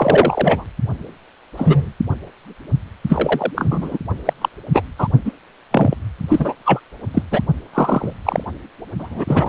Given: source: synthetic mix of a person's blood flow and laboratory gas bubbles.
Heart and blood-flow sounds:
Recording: Doppler ultrasound of blood flow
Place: precordium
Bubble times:
0.00-0.65 s: bubbles
1.57-1.93 s: bubbles
3.09-3.51 s: bubbles
3.55-3.98 s: bubbles
4.25-4.33 s: bubbles
4.41-4.49 s: bubbles
4.73-4.82 s: bubbles
4.98-5.08 s: bubbles
5.25-5.31 s: bubbles
5.71-5.95 s: bubbles
6.28-6.54 s: bubbles
6.65-6.80 s: bubbles
7.13-7.22 s: bubbles
7.31-7.41 s: bubbles
7.73-8.12 s: bubbles
8.25-8.44 s: bubbles
8.99-9.48 s: bubbles
From the record:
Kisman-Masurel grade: 243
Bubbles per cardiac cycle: several, 3 to 8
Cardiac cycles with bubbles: 100%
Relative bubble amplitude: loud (0.450 to 0.775)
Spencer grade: 3 (all of the cardiac periods contain showers or single bubble signals, but not dominating or overriding the cardiac motion signals)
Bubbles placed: only in the low amplitude regions of the cardiac cycle

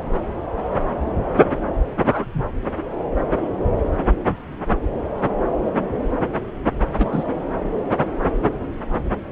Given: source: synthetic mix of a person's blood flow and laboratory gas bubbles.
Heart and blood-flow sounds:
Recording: Doppler ultrasound of blood flow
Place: subclavian vein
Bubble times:
2.00-2.45 s: bubbles
6.98-7.24 s: bubbles
From the record:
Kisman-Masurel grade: 113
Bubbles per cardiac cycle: 1 to 2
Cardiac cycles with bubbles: 1 to 10%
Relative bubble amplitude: loud (0.450 to 0.775)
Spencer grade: 1 (occasional bubble signal discernible with the cardiac motion signal, with majority of cardiac periods free of bubbles)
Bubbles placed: anywhere in the cardiac cycle

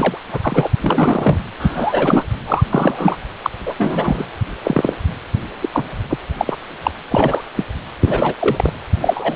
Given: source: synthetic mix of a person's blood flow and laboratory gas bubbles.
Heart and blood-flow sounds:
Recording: Doppler ultrasound of blood flow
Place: precordium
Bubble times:
0.00-0.18 s: bubbles
0.33-0.67 s: bubbles
0.80-1.39 s: bubbles
1.59-2.24 s: bubbles
2.46-2.64 s: bubbles
2.71-3.17 s: bubbles
3.44-3.50 s: bubbles
3.66-3.74 s: bubbles
3.78-4.25 s: bubbles
4.64-4.96 s: bubbles
5.61-5.70 s: bubbles
5.73-5.83 s: bubbles
6.10-6.18 s: bubbles
6.38-6.57 s: bubbles
6.84-6.91 s: bubbles
7.11-7.42 s: bubbles
7.57-7.67 s: bubbles
8.00-8.34 s: bubbles
8.40-8.72 s: bubbles
9.00-9.36 s: bubbles
From the record:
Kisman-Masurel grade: 243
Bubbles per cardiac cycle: several, 3 to 8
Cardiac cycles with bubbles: 100%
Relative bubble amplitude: loud (0.450 to 0.775)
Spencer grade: 3 (all of the cardiac periods contain showers or single bubble signals, but not dominating or overriding the cardiac motion signals)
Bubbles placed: anywhere in the cardiac cycle

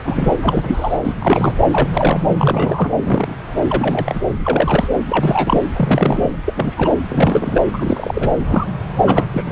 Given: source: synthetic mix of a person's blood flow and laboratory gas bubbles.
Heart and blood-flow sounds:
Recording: Doppler ultrasound of blood flow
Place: subclavian vein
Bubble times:
0.05-0.34 s: bubbles
0.39-0.98 s: bubbles
1.04-1.14 s: bubbles
1.19-1.54 s: bubbles
1.72-1.87 s: bubbles
1.93-2.20 s: bubbles
2.39-2.92 s: bubbles
3.03-3.35 s: bubbles
3.68-4.21 s: bubbles
4.45-4.88 s: bubbles
5.09-5.61 s: bubbles
5.76-6.37 s: bubbles
6.45-6.95 s: bubbles
7.09-7.62 s: bubbles
7.73-8.29 s: bubbles
8.49-8.67 s: bubbles
9.04-9.26 s: bubbles
9.29-9.52 s: bubbles
From the record:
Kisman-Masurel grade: 242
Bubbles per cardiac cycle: several, 3 to 8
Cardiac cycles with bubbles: 100%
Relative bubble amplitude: moderate (0.250 to 0.450)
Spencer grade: 3 (all of the cardiac periods contain showers or single bubble signals, but not dominating or overriding the cardiac motion signals)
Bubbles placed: anywhere in the cardiac cycle

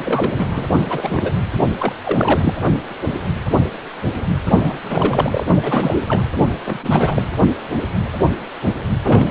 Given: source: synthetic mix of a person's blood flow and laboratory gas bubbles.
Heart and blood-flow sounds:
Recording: Doppler ultrasound of blood flow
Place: precordium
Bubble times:
0.05-0.65 s: bubbles
0.80-1.32 s: bubbles
1.78-1.92 s: bubbles
2.04-2.54 s: bubbles
4.59-4.78 s: bubbles
4.83-5.43 s: bubbles
5.62-6.03 s: bubbles
6.08-6.24 s: bubbles
6.65-7.22 s: bubbles
9.03-9.31 s: bubbles
From the record:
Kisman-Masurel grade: 332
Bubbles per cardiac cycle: rolling drumbeat, 9 or more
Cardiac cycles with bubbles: 50 to 99%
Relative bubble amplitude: moderate (0.250 to 0.450)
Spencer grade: 3 (all of the cardiac periods contain showers or single bubble signals, but not dominating or overriding the cardiac motion signals)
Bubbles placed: only in the low amplitude regions of the cardiac cycle

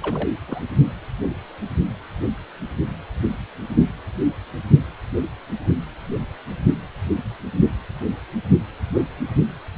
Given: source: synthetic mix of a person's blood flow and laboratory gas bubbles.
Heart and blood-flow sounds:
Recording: Doppler ultrasound of blood flow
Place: precordium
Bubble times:
0.01-0.29 s: bubbles
0.47-0.61 s: bubbles
From the record:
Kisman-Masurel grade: 211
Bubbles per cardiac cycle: several, 3 to 8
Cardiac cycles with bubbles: 1 to 10%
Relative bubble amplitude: barely perceptible (0.100 to 0.250)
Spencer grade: 1 (occasional bubble signal discernible with the cardiac motion signal, with majority of cardiac periods free of bubbles)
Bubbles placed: only in the low amplitude regions of the cardiac cycle

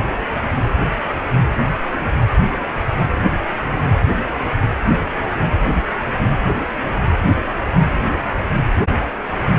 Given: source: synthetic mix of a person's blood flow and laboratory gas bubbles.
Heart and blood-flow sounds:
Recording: Doppler ultrasound of blood flow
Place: precordium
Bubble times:
no bubbles
From the record:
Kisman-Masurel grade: 000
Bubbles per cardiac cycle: 0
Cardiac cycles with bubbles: 0%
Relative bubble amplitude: no bubbles discernible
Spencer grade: 0 (complete lack of bubble signals)

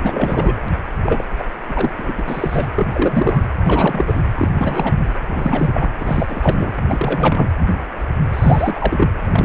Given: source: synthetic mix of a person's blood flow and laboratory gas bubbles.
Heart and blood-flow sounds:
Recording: Doppler ultrasound of blood flow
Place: precordium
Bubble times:
0.00-0.54 s: bubbles
1.01-1.24 s: bubbles
1.38-1.45 s: bubbles
1.68-1.90 s: bubbles
1.98-2.12 s: bubbles
2.17-2.23 s: bubbles
2.28-2.68 s: bubbles
2.75-2.87 s: bubbles
2.90-3.43 s: bubbles
3.64-4.23 s: bubbles
4.33-4.49 s: bubbles
4.52-4.94 s: bubbles
5.25-5.91 s: bubbles
6.00-6.73 s: bubbles
6.88-7.50 s: bubbles
8.33-9.08 s: bubbles
9.29-9.45 s: bubbles
From the record:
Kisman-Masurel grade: 333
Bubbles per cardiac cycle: rolling drumbeat, 9 or more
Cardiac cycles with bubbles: 50 to 99%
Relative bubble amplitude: loud (0.450 to 0.775)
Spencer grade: 3 (all of the cardiac periods contain showers or single bubble signals, but not dominating or overriding the cardiac motion signals)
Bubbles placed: anywhere in the cardiac cycle

